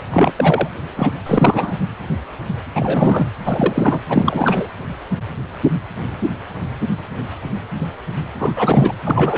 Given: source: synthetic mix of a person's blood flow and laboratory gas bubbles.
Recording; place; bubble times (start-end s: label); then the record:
Doppler ultrasound of blood flow; precordium
0.10-0.33 s: bubbles
0.36-0.69 s: bubbles
0.96-1.11 s: bubbles
1.26-1.73 s: bubbles
2.74-3.27 s: bubbles
3.46-4.00 s: bubbles
4.07-4.68 s: bubbles
8.38-8.92 s: bubbles
9.04-9.37 s: bubbles
From the record:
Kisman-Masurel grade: 333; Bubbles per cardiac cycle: rolling drumbeat, 9 or more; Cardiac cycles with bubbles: 50 to 99%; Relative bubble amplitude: loud (0.450 to 0.775); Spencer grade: 3 (all of the cardiac periods contain showers or single bubble signals, but not dominating or overriding the cardiac motion signals); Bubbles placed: anywhere in the cardiac cycle